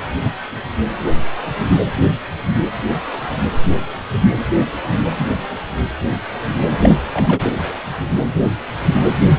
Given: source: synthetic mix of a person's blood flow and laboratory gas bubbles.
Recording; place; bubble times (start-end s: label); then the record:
Doppler ultrasound of blood flow; precordium
6.66-6.95 s: bubbles
7.12-7.42 s: bubbles
From the record:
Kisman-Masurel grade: 212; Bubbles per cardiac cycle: several, 3 to 8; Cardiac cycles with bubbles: 1 to 10%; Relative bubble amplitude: moderate (0.250 to 0.450); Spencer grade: 1 (occasional bubble signal discernible with the cardiac motion signal, with majority of cardiac periods free of bubbles); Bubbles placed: anywhere in the cardiac cycle